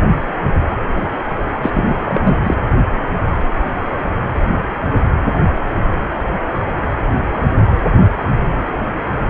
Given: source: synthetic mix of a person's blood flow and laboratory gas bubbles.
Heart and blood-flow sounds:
Doppler ultrasound of blood flow; precordium
1.62-1.99 s: bubbles
2.04-2.38 s: bubbles
2.44-2.54 s: bubbles
From the record:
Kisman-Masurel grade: 213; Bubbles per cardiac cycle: several, 3 to 8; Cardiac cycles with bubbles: 1 to 10%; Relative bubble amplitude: loud (0.450 to 0.775); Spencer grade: 1 (occasional bubble signal discernible with the cardiac motion signal, with majority of cardiac periods free of bubbles); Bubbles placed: anywhere in the cardiac cycle

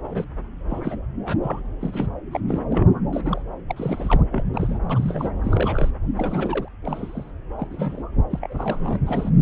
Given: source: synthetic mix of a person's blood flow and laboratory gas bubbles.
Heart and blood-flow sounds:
Doppler ultrasound of blood flow; subclavian vein
0.04-0.25 s: bubbles
0.70-0.98 s: bubbles
1.25-1.37 s: bubbles
1.43-1.62 s: bubbles
1.80-2.07 s: bubbles
2.31-2.40 s: bubbles
2.47-2.59 s: bubbles
2.69-2.87 s: bubbles
3.12-3.41 s: bubbles
3.68-4.23 s: bubbles
4.31-4.44 s: bubbles
4.54-4.79 s: bubbles
4.90-5.31 s: bubbles
5.43-5.92 s: bubbles
6.17-6.69 s: bubbles
6.85-7.31 s: bubbles
7.58-7.68 s: bubbles
7.71-8.04 s: bubbles
8.29-8.97 s: bubbles
9.05-9.30 s: bubbles
From the record:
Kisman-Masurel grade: 242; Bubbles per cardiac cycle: several, 3 to 8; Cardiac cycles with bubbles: 100%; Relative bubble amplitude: moderate (0.250 to 0.450); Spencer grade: 3 (all of the cardiac periods contain showers or single bubble signals, but not dominating or overriding the cardiac motion signals); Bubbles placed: anywhere in the cardiac cycle

